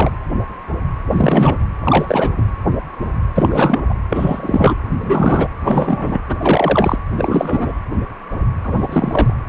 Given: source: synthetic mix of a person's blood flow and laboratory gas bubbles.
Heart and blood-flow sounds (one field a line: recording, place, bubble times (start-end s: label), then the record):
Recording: Doppler ultrasound of blood flow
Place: precordium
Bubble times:
0.00-0.12 s: bubbles
1.12-1.56 s: bubbles
1.82-2.30 s: bubbles
2.37-2.43 s: bubbles
3.34-3.94 s: bubbles
4.10-4.76 s: bubbles
5.01-5.49 s: bubbles
5.62-6.20 s: bubbles
6.28-6.99 s: bubbles
7.18-7.72 s: bubbles
8.63-9.34 s: bubbles
From the record:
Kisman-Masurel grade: 333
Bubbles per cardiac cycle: rolling drumbeat, 9 or more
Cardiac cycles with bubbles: 50 to 99%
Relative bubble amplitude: loud (0.450 to 0.775)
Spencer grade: 3 (all of the cardiac periods contain showers or single bubble signals, but not dominating or overriding the cardiac motion signals)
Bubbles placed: anywhere in the cardiac cycle